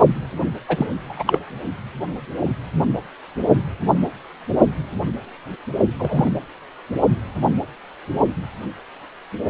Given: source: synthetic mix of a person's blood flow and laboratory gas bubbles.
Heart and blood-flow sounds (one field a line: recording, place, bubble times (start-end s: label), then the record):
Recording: Doppler ultrasound of blood flow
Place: precordium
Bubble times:
0.68-0.86 s: bubbles
1.08-1.23 s: bubbles
1.27-1.39 s: bubbles
5.99-6.31 s: bubbles
From the record:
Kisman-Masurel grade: 222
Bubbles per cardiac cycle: several, 3 to 8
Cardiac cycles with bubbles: 10 to 50%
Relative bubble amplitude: moderate (0.250 to 0.450)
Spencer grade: 2 (many but less than half of the cardiac periods contain bubble signals, singularly or in groups)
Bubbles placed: only in the low amplitude regions of the cardiac cycle